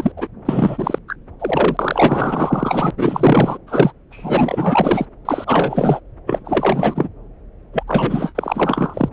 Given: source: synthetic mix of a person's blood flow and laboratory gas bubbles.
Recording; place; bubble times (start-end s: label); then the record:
Doppler ultrasound of blood flow; subclavian vein
0.00-0.12 s: bubbles
0.16-0.27 s: bubbles
0.45-0.98 s: bubbles
1.08-1.15 s: bubbles
1.40-2.91 s: bubbles
2.97-3.58 s: bubbles
3.67-3.92 s: bubbles
4.11-5.05 s: bubbles
5.25-6.00 s: bubbles
6.26-7.08 s: bubbles
7.73-7.83 s: bubbles
7.87-9.09 s: bubbles
From the record:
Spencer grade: 4 (maximum detectable bubble signal sounding continuously throughout systole and diastole of every cardiac period, and overriding the amplitude of the normal cardiac signals); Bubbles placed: anywhere in the cardiac cycle